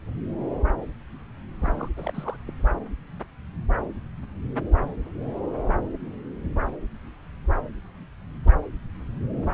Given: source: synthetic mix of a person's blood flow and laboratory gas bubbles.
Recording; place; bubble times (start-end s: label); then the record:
Doppler ultrasound of blood flow; subclavian vein
1.60-1.88 s: bubbles
1.96-2.36 s: bubbles
2.46-2.52 s: bubbles
From the record:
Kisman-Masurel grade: 211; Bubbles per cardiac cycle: several, 3 to 8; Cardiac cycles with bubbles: 1 to 10%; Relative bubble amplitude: barely perceptible (0.100 to 0.250); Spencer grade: 1 (occasional bubble signal discernible with the cardiac motion signal, with majority of cardiac periods free of bubbles); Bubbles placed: anywhere in the cardiac cycle